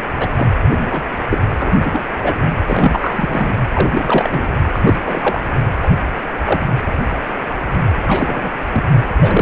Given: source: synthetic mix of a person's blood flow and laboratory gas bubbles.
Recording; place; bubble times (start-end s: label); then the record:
Doppler ultrasound of blood flow; precordium
0.19-0.27 s: bubbles
0.36-0.48 s: bubbles
0.78-0.88 s: bubbles
0.91-1.05 s: bubbles
1.30-1.38 s: bubbles
1.59-1.77 s: bubbles
1.82-2.04 s: bubbles
2.24-2.38 s: bubbles
2.66-3.51 s: bubbles
3.71-4.52 s: bubbles
4.72-4.80 s: bubbles
4.84-5.00 s: bubbles
5.06-5.40 s: bubbles
5.83-5.88 s: bubbles
6.44-6.60 s: bubbles
8.07-8.53 s: bubbles
8.73-8.84 s: bubbles
9.17-9.42 s: bubbles
From the record:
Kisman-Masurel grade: 232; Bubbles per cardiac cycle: several, 3 to 8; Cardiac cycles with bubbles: 50 to 99%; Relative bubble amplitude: moderate (0.250 to 0.450); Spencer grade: 3 (all of the cardiac periods contain showers or single bubble signals, but not dominating or overriding the cardiac motion signals); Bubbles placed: anywhere in the cardiac cycle